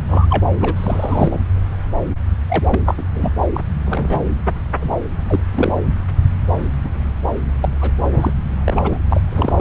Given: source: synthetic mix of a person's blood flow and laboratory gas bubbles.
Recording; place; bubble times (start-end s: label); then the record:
Doppler ultrasound of blood flow; subclavian vein
0.09-0.26 s: bubbles
0.29-0.46 s: bubbles
0.60-1.40 s: bubbles
2.48-2.79 s: bubbles
2.85-3.03 s: bubbles
3.15-3.33 s: bubbles
3.54-3.60 s: bubbles
3.85-4.23 s: bubbles
4.81-4.93 s: bubbles
5.30-5.40 s: bubbles
5.53-5.75 s: bubbles
6.83-6.89 s: bubbles
7.62-7.74 s: bubbles
7.80-7.92 s: bubbles
8.12-8.33 s: bubbles
8.64-8.97 s: bubbles
9.08-9.21 s: bubbles
9.30-9.61 s: bubbles
From the record:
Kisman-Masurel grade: 242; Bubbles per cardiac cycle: several, 3 to 8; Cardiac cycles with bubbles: 100%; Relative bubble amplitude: moderate (0.250 to 0.450); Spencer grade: 3 (all of the cardiac periods contain showers or single bubble signals, but not dominating or overriding the cardiac motion signals); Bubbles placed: anywhere in the cardiac cycle